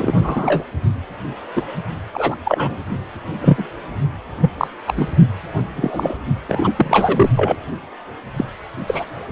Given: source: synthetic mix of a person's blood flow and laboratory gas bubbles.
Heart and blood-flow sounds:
Doppler ultrasound of blood flow; precordium
0.00-0.14 s: bubbles
0.19-0.63 s: bubbles
1.55-1.62 s: bubbles
2.14-2.35 s: bubbles
2.44-2.77 s: bubbles
3.41-3.65 s: bubbles
4.41-4.50 s: bubbles
4.58-4.68 s: bubbles
4.87-4.94 s: bubbles
4.97-5.07 s: bubbles
5.75-6.18 s: bubbles
6.48-6.73 s: bubbles
6.76-7.30 s: bubbles
7.36-7.56 s: bubbles
8.36-8.45 s: bubbles
8.87-9.05 s: bubbles
From the record:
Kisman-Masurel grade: 243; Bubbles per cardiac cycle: several, 3 to 8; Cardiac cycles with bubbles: 100%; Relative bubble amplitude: loud (0.450 to 0.775); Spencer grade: 3 (all of the cardiac periods contain showers or single bubble signals, but not dominating or overriding the cardiac motion signals); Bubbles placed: only in the low amplitude regions of the cardiac cycle

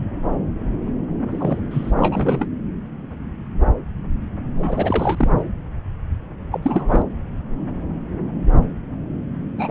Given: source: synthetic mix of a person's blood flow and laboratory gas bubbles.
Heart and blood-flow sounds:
Doppler ultrasound of blood flow; subclavian vein
1.31-1.60 s: bubbles
1.70-1.92 s: bubbles
1.97-2.47 s: bubbles
4.56-5.43 s: bubbles
6.51-7.02 s: bubbles
9.57-9.71 s: bubbles
From the record:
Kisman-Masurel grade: 222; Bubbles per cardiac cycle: several, 3 to 8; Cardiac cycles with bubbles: 10 to 50%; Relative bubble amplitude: moderate (0.250 to 0.450); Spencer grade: 2 (many but less than half of the cardiac periods contain bubble signals, singularly or in groups); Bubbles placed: anywhere in the cardiac cycle

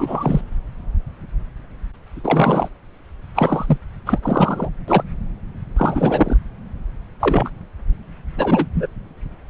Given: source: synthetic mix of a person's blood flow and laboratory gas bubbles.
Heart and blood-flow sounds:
Doppler ultrasound of blood flow; subclavian vein
0.00-0.41 s: bubbles
2.24-2.68 s: bubbles
3.35-3.77 s: bubbles
4.05-4.19 s: bubbles
4.22-4.69 s: bubbles
4.88-5.04 s: bubbles
5.76-6.37 s: bubbles
7.19-7.50 s: bubbles
8.36-8.67 s: bubbles
8.75-8.87 s: bubbles
From the record:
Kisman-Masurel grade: 223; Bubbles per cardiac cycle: several, 3 to 8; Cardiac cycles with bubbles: 10 to 50%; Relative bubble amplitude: loud (0.450 to 0.775); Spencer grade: 2 (many but less than half of the cardiac periods contain bubble signals, singularly or in groups); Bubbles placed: anywhere in the cardiac cycle

